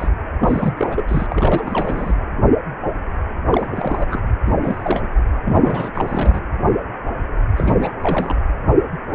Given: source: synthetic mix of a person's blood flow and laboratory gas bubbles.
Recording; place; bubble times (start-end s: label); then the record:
Doppler ultrasound of blood flow; precordium
0.00-0.08 s: bubbles
0.39-0.74 s: bubbles
0.77-1.04 s: bubbles
1.07-1.26 s: bubbles
1.30-2.12 s: bubbles
3.50-4.20 s: bubbles
4.46-4.53 s: bubbles
4.62-5.01 s: bubbles
5.45-5.91 s: bubbles
5.95-6.45 s: bubbles
7.56-7.74 s: bubbles
7.80-7.91 s: bubbles
8.03-8.36 s: bubbles
From the record:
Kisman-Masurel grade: 332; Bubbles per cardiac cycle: rolling drumbeat, 9 or more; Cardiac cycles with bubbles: 50 to 99%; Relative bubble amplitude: moderate (0.250 to 0.450); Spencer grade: 3 (all of the cardiac periods contain showers or single bubble signals, but not dominating or overriding the cardiac motion signals); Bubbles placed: anywhere in the cardiac cycle